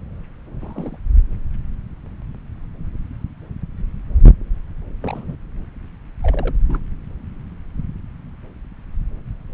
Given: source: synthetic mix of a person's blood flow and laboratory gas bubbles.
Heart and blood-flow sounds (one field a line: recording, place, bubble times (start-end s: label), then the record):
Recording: Doppler ultrasound of blood flow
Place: subclavian vein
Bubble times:
0.58-0.99 s: bubbles
5.01-5.36 s: bubbles
6.22-6.55 s: bubbles
6.67-6.80 s: bubbles
From the record:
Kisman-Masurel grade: 221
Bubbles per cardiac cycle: several, 3 to 8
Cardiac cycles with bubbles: 10 to 50%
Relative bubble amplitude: barely perceptible (0.100 to 0.250)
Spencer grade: 2 (many but less than half of the cardiac periods contain bubble signals, singularly or in groups)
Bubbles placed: anywhere in the cardiac cycle